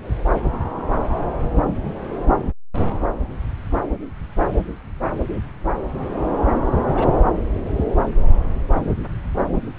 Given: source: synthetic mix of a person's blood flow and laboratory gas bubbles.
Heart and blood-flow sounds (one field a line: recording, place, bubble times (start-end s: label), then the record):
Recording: Doppler ultrasound of blood flow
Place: subclavian vein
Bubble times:
6.94-7.06 s: bubbles
From the record:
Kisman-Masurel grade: 122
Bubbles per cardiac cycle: 1 to 2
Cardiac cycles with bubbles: 10 to 50%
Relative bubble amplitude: moderate (0.250 to 0.450)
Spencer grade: 2 (many but less than half of the cardiac periods contain bubble signals, singularly or in groups)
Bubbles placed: anywhere in the cardiac cycle